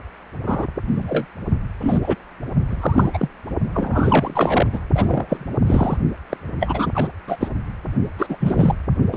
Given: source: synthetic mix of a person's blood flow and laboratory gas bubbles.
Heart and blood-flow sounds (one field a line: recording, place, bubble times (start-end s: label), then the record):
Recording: Doppler ultrasound of blood flow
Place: precordium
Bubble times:
0.46-0.67 s: bubbles
0.95-1.26 s: bubbles
1.80-1.99 s: bubbles
2.02-2.16 s: bubbles
2.66-3.29 s: bubbles
3.74-4.67 s: bubbles
4.72-4.79 s: bubbles
4.95-5.46 s: bubbles
5.67-5.97 s: bubbles
6.29-6.37 s: bubbles
6.60-7.08 s: bubbles
7.27-7.48 s: bubbles
8.18-8.26 s: bubbles
8.29-8.36 s: bubbles
8.39-8.75 s: bubbles
9.12-9.17 s: bubbles
From the record:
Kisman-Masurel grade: 243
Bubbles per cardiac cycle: several, 3 to 8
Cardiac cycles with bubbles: 100%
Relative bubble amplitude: loud (0.450 to 0.775)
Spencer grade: 3 (all of the cardiac periods contain showers or single bubble signals, but not dominating or overriding the cardiac motion signals)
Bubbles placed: only in the low amplitude regions of the cardiac cycle